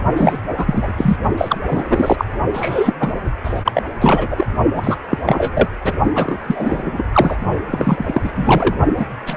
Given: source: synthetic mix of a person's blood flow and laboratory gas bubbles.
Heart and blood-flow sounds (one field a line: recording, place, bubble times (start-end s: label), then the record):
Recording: Doppler ultrasound of blood flow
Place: precordium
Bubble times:
0.00-0.03 s: bubbles
0.16-0.38 s: bubbles
0.56-0.93 s: bubbles
0.98-1.17 s: bubbles
1.37-1.58 s: bubbles
1.67-2.25 s: bubbles
2.54-2.94 s: bubbles
3.00-3.12 s: bubbles
3.44-3.62 s: bubbles
3.65-3.72 s: bubbles
3.75-3.83 s: bubbles
3.99-4.27 s: bubbles
4.30-4.46 s: bubbles
4.75-4.96 s: bubbles
5.09-5.18 s: bubbles
5.26-5.51 s: bubbles
5.54-5.68 s: bubbles
5.83-5.93 s: bubbles
6.14-6.37 s: bubbles
6.47-7.04 s: bubbles
7.12-7.37 s: bubbles
7.71-8.31 s: bubbles
8.35-8.76 s: bubbles
8.96-9.05 s: bubbles
9.26-9.37 s: bubbles
From the record:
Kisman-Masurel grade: 343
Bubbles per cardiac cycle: rolling drumbeat, 9 or more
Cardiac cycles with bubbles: 100%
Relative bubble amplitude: loud (0.450 to 0.775)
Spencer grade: 3 (all of the cardiac periods contain showers or single bubble signals, but not dominating or overriding the cardiac motion signals)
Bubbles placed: only in the low amplitude regions of the cardiac cycle